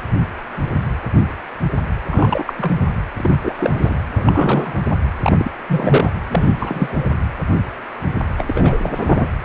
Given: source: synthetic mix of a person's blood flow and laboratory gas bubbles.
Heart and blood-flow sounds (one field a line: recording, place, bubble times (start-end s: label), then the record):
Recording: Doppler ultrasound of blood flow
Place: precordium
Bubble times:
2.09-2.53 s: bubbles
2.58-2.75 s: bubbles
3.17-3.38 s: bubbles
3.43-3.54 s: bubbles
3.58-3.98 s: bubbles
4.16-4.79 s: bubbles
4.90-4.96 s: bubbles
5.23-5.32 s: bubbles
5.38-5.51 s: bubbles
5.67-6.12 s: bubbles
6.28-6.53 s: bubbles
6.57-7.10 s: bubbles
8.38-9.28 s: bubbles
From the record:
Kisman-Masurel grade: 332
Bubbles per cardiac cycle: rolling drumbeat, 9 or more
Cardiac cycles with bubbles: 50 to 99%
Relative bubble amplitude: moderate (0.250 to 0.450)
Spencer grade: 3 (all of the cardiac periods contain showers or single bubble signals, but not dominating or overriding the cardiac motion signals)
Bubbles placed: anywhere in the cardiac cycle